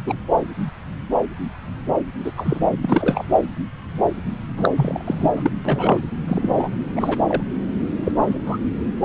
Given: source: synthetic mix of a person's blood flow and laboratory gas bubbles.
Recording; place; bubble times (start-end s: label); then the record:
Doppler ultrasound of blood flow; subclavian vein
0.06-0.16 s: bubbles
2.24-2.32 s: bubbles
2.36-2.60 s: bubbles
2.82-3.25 s: bubbles
4.57-4.69 s: bubbles
4.75-5.29 s: bubbles
5.35-5.51 s: bubbles
5.65-6.00 s: bubbles
6.27-6.69 s: bubbles
6.96-7.17 s: bubbles
7.27-7.42 s: bubbles
8.03-8.12 s: bubbles
8.23-8.38 s: bubbles
8.46-8.58 s: bubbles
From the record:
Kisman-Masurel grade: 233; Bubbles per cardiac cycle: several, 3 to 8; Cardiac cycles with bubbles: 50 to 99%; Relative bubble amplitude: loud (0.450 to 0.775); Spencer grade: 3 (all of the cardiac periods contain showers or single bubble signals, but not dominating or overriding the cardiac motion signals); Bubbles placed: anywhere in the cardiac cycle